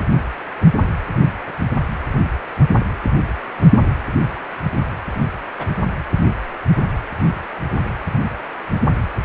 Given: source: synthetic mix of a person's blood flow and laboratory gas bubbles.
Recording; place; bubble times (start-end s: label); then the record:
Doppler ultrasound of blood flow; precordium
5.59-5.65 s: bubbles
From the record:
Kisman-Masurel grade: 112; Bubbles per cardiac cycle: 1 to 2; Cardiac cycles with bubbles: 1 to 10%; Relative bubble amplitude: moderate (0.250 to 0.450); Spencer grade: 1 (occasional bubble signal discernible with the cardiac motion signal, with majority of cardiac periods free of bubbles); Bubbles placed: anywhere in the cardiac cycle